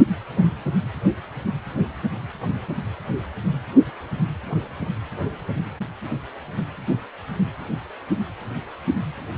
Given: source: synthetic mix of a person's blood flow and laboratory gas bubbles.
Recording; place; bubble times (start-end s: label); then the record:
Doppler ultrasound of blood flow; precordium
no bubbles
From the record:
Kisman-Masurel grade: 000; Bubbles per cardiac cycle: 0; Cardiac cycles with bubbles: 0%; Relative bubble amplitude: no bubbles discernible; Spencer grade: 0 (complete lack of bubble signals)